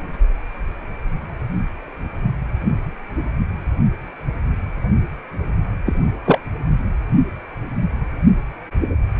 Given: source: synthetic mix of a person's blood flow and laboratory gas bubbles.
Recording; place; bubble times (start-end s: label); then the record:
Doppler ultrasound of blood flow; precordium
5.86-5.93 s: bubbles
6.25-6.41 s: bubbles
From the record:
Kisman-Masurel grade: 213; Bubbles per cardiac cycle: several, 3 to 8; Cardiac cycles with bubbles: 1 to 10%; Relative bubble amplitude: loud (0.450 to 0.775); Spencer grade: 1 (occasional bubble signal discernible with the cardiac motion signal, with majority of cardiac periods free of bubbles); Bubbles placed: only in the low amplitude regions of the cardiac cycle